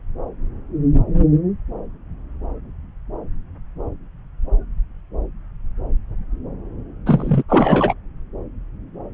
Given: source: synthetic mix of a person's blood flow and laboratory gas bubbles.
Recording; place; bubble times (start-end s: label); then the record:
Doppler ultrasound of blood flow; subclavian vein
7.06-7.43 s: bubbles
7.48-7.94 s: bubbles
From the record:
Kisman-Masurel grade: 213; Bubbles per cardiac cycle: several, 3 to 8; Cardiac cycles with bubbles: 1 to 10%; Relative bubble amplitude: loud (0.450 to 0.775); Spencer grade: 1 (occasional bubble signal discernible with the cardiac motion signal, with majority of cardiac periods free of bubbles); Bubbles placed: anywhere in the cardiac cycle